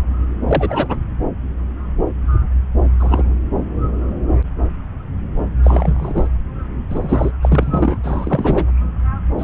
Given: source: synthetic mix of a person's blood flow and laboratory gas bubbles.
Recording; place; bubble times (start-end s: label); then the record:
Doppler ultrasound of blood flow; subclavian vein
0.47-0.98 s: bubbles
2.99-3.34 s: bubbles
5.63-6.28 s: bubbles
6.90-7.32 s: bubbles
7.43-7.97 s: bubbles
8.03-8.66 s: bubbles
9.38-9.44 s: bubbles
From the record:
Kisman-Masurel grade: 223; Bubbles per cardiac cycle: several, 3 to 8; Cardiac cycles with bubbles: 10 to 50%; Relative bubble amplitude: loud (0.450 to 0.775); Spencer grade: 2 (many but less than half of the cardiac periods contain bubble signals, singularly or in groups); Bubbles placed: anywhere in the cardiac cycle